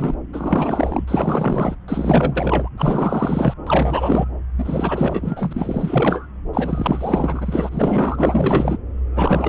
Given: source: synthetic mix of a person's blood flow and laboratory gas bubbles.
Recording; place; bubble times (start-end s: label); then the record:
Doppler ultrasound of blood flow; subclavian vein
0.00-0.14 s: bubbles
0.33-1.76 s: bubbles
1.88-2.69 s: bubbles
2.77-3.54 s: bubbles
3.67-4.25 s: bubbles
4.57-6.26 s: bubbles
6.53-8.78 s: bubbles
9.15-9.49 s: bubbles
From the record:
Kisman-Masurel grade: 444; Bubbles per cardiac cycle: continuous sound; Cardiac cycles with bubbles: 100%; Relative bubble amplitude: maximal (0.775 to 0.999); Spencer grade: 4 (maximum detectable bubble signal sounding continuously throughout systole and diastole of every cardiac period, and overriding the amplitude of the normal cardiac signals); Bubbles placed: anywhere in the cardiac cycle